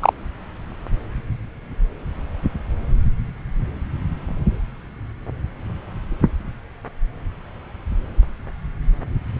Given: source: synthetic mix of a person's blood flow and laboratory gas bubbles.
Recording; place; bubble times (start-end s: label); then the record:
Doppler ultrasound of blood flow; subclavian vein
0.01-0.13 s: bubbles
From the record:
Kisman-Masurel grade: 223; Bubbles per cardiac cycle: several, 3 to 8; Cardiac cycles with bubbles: 10 to 50%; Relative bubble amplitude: loud (0.450 to 0.775); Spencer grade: 2 (many but less than half of the cardiac periods contain bubble signals, singularly or in groups); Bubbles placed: anywhere in the cardiac cycle